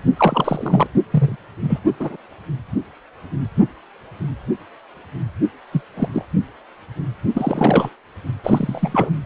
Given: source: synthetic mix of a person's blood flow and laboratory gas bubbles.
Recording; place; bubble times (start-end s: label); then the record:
Doppler ultrasound of blood flow; precordium
0.17-0.87 s: bubbles
1.12-1.37 s: bubbles
1.62-1.79 s: bubbles
2.00-2.17 s: bubbles
5.72-5.82 s: bubbles
5.97-6.08 s: bubbles
6.14-6.25 s: bubbles
7.33-7.90 s: bubbles
8.44-9.11 s: bubbles
From the record:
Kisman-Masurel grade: 233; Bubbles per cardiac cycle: several, 3 to 8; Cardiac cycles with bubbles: 50 to 99%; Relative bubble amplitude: loud (0.450 to 0.775); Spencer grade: 3 (all of the cardiac periods contain showers or single bubble signals, but not dominating or overriding the cardiac motion signals); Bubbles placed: only in the low amplitude regions of the cardiac cycle